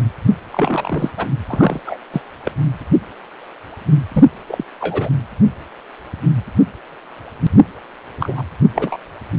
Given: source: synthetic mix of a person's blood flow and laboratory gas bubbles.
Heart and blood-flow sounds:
Doppler ultrasound of blood flow; precordium
0.52-1.10 s: bubbles
1.17-1.26 s: bubbles
1.49-1.80 s: bubbles
1.86-1.98 s: bubbles
2.12-2.21 s: bubbles
2.45-2.51 s: bubbles
4.13-4.25 s: bubbles
4.48-4.64 s: bubbles
4.80-5.09 s: bubbles
8.20-8.43 s: bubbles
8.75-8.97 s: bubbles
From the record:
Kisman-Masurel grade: 222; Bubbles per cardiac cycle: several, 3 to 8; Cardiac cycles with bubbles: 10 to 50%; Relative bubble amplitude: moderate (0.250 to 0.450); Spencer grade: 2 (many but less than half of the cardiac periods contain bubble signals, singularly or in groups); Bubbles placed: anywhere in the cardiac cycle

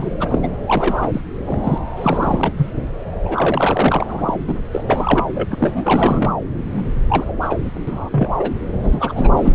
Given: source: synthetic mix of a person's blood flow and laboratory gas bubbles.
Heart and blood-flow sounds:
Doppler ultrasound of blood flow; subclavian vein
0.00-0.11 s: bubbles
0.20-0.39 s: bubbles
0.42-0.48 s: bubbles
0.66-1.21 s: bubbles
1.47-1.60 s: bubbles
1.64-1.78 s: bubbles
1.97-2.53 s: bubbles
2.56-2.71 s: bubbles
3.25-4.38 s: bubbles
4.47-4.55 s: bubbles
4.72-4.84 s: bubbles
4.87-5.26 s: bubbles
5.33-5.49 s: bubbles
5.51-6.34 s: bubbles
6.72-6.84 s: bubbles
7.08-7.33 s: bubbles
7.41-7.58 s: bubbles
7.63-7.71 s: bubbles
7.87-8.35 s: bubbles
8.39-8.51 s: bubbles
8.84-9.29 s: bubbles
9.37-9.53 s: bubbles
From the record:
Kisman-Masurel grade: 342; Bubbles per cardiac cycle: rolling drumbeat, 9 or more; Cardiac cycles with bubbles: 100%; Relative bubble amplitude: moderate (0.250 to 0.450); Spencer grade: 3 (all of the cardiac periods contain showers or single bubble signals, but not dominating or overriding the cardiac motion signals); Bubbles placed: anywhere in the cardiac cycle

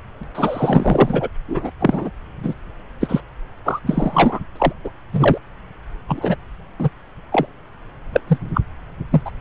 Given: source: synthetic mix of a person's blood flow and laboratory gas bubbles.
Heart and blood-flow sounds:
Doppler ultrasound of blood flow; subclavian vein
0.20-0.23 s: bubbles
0.34-1.28 s: bubbles
1.48-1.71 s: bubbles
1.80-2.10 s: bubbles
2.43-2.54 s: bubbles
3.00-3.21 s: bubbles
3.65-3.80 s: bubbles
3.86-4.40 s: bubbles
4.55-4.73 s: bubbles
4.83-4.90 s: bubbles
5.12-5.38 s: bubbles
6.08-6.36 s: bubbles
6.79-6.90 s: bubbles
7.32-7.47 s: bubbles
8.13-8.21 s: bubbles
8.27-8.38 s: bubbles
8.54-8.61 s: bubbles
9.10-9.21 s: bubbles
9.25-9.31 s: bubbles
From the record:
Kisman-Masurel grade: 243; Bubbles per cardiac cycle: several, 3 to 8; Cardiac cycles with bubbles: 100%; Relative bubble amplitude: loud (0.450 to 0.775); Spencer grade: 3 (all of the cardiac periods contain showers or single bubble signals, but not dominating or overriding the cardiac motion signals); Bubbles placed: anywhere in the cardiac cycle

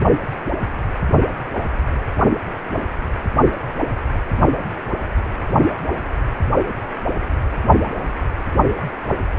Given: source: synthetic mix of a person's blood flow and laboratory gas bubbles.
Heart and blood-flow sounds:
Doppler ultrasound of blood flow; precordium
no bubbles
From the record:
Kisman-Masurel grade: 000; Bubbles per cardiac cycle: 0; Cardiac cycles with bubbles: 0%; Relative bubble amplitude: no bubbles discernible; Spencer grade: 0 (complete lack of bubble signals)

